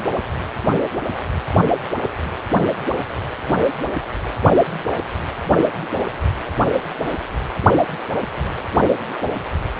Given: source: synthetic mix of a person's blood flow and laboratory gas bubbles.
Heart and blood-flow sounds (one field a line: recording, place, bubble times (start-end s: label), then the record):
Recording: Doppler ultrasound of blood flow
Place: precordium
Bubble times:
3.50-3.55 s: bubbles
From the record:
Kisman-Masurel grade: 111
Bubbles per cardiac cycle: 1 to 2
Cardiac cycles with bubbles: 1 to 10%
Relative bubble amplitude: barely perceptible (0.100 to 0.250)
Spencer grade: 1 (occasional bubble signal discernible with the cardiac motion signal, with majority of cardiac periods free of bubbles)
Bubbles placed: only in the low amplitude regions of the cardiac cycle